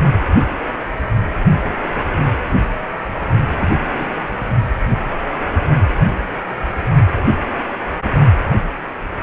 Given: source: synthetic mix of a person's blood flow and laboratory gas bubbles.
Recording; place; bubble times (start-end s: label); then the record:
Doppler ultrasound of blood flow; precordium
3.55-3.67 s: bubbles
3.97-4.07 s: bubbles
From the record:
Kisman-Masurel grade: 122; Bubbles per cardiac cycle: 1 to 2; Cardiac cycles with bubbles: 10 to 50%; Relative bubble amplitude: moderate (0.250 to 0.450); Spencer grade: 2 (many but less than half of the cardiac periods contain bubble signals, singularly or in groups); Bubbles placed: only in the low amplitude regions of the cardiac cycle